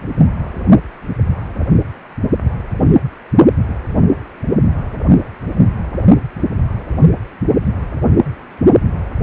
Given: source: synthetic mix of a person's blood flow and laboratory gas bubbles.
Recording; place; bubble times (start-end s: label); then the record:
Doppler ultrasound of blood flow; precordium
0.19-0.27 s: bubbles
From the record:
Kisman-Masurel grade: 112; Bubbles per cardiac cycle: 1 to 2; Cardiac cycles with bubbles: 1 to 10%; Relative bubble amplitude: moderate (0.250 to 0.450); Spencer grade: 1 (occasional bubble signal discernible with the cardiac motion signal, with majority of cardiac periods free of bubbles); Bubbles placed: anywhere in the cardiac cycle